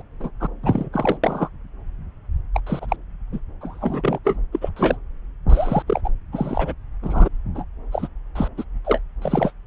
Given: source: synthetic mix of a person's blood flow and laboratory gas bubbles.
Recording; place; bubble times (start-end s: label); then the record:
Doppler ultrasound of blood flow; subclavian vein
0.00-0.03 s: bubbles
0.20-0.31 s: bubbles
0.40-0.47 s: bubbles
0.62-0.89 s: bubbles
0.93-1.18 s: bubbles
1.23-1.49 s: bubbles
2.54-2.60 s: bubbles
2.67-2.96 s: bubbles
3.32-3.40 s: bubbles
3.60-4.19 s: bubbles
4.25-4.36 s: bubbles
4.52-4.69 s: bubbles
4.76-4.97 s: bubbles
5.49-5.83 s: bubbles
5.87-6.01 s: bubbles
6.04-6.09 s: bubbles
6.33-6.73 s: bubbles
7.02-7.29 s: bubbles
7.54-7.64 s: bubbles
7.92-8.08 s: bubbles
8.35-8.48 s: bubbles
8.58-8.63 s: bubbles
8.85-9.01 s: bubbles
9.21-9.52 s: bubbles
From the record:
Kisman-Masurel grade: 232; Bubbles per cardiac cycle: several, 3 to 8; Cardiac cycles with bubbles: 50 to 99%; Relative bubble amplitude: moderate (0.250 to 0.450); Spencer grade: 3 (all of the cardiac periods contain showers or single bubble signals, but not dominating or overriding the cardiac motion signals); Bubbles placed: anywhere in the cardiac cycle